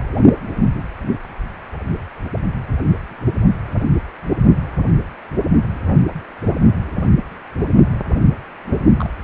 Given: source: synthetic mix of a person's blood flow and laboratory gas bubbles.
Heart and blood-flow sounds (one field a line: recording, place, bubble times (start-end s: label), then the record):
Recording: Doppler ultrasound of blood flow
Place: precordium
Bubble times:
8.98-9.10 s: bubbles
9.17-9.24 s: bubbles
From the record:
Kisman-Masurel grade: 111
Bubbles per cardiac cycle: 1 to 2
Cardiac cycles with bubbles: 1 to 10%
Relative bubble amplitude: barely perceptible (0.100 to 0.250)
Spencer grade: 1 (occasional bubble signal discernible with the cardiac motion signal, with majority of cardiac periods free of bubbles)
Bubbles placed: only in the low amplitude regions of the cardiac cycle